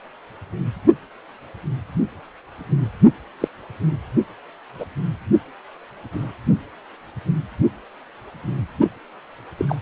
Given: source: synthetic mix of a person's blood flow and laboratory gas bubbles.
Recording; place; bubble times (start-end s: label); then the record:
Doppler ultrasound of blood flow; precordium
3.40-3.48 s: bubbles
4.79-4.86 s: bubbles
6.12-6.33 s: bubbles
9.58-9.65 s: bubbles
9.68-9.75 s: bubbles
From the record:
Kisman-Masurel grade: 122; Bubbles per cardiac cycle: 1 to 2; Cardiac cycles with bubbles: 10 to 50%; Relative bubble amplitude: moderate (0.250 to 0.450); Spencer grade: 2 (many but less than half of the cardiac periods contain bubble signals, singularly or in groups); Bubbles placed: only in the low amplitude regions of the cardiac cycle